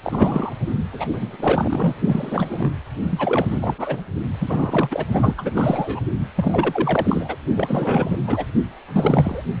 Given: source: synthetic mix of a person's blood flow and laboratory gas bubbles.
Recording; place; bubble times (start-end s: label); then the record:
Doppler ultrasound of blood flow; precordium
0.03-0.54 s: bubbles
0.91-1.07 s: bubbles
1.12-1.36 s: bubbles
1.39-1.95 s: bubbles
2.05-2.70 s: bubbles
3.10-3.75 s: bubbles
3.78-4.01 s: bubbles
4.40-5.06 s: bubbles
5.12-5.34 s: bubbles
5.37-6.00 s: bubbles
6.35-7.36 s: bubbles
7.54-8.19 s: bubbles
8.27-8.45 s: bubbles
8.94-9.43 s: bubbles
From the record:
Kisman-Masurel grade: 343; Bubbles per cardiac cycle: rolling drumbeat, 9 or more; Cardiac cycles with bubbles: 100%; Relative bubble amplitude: loud (0.450 to 0.775); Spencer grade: 3 (all of the cardiac periods contain showers or single bubble signals, but not dominating or overriding the cardiac motion signals); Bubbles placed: only in the low amplitude regions of the cardiac cycle